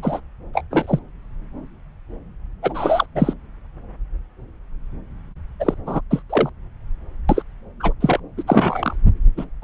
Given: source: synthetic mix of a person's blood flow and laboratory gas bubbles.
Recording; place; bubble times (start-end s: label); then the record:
Doppler ultrasound of blood flow; subclavian vein
0.02-0.21 s: bubbles
0.54-0.63 s: bubbles
0.70-0.99 s: bubbles
2.62-3.06 s: bubbles
3.15-3.33 s: bubbles
5.59-5.75 s: bubbles
5.86-6.01 s: bubbles
6.10-6.22 s: bubbles
6.29-6.50 s: bubbles
7.29-7.42 s: bubbles
7.80-7.93 s: bubbles
8.01-8.20 s: bubbles
8.37-8.43 s: bubbles
8.47-8.96 s: bubbles
9.37-9.45 s: bubbles
9.62-9.64 s: bubbles
From the record:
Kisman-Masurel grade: 233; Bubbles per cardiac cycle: several, 3 to 8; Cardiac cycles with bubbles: 50 to 99%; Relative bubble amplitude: loud (0.450 to 0.775); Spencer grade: 3 (all of the cardiac periods contain showers or single bubble signals, but not dominating or overriding the cardiac motion signals); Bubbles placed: anywhere in the cardiac cycle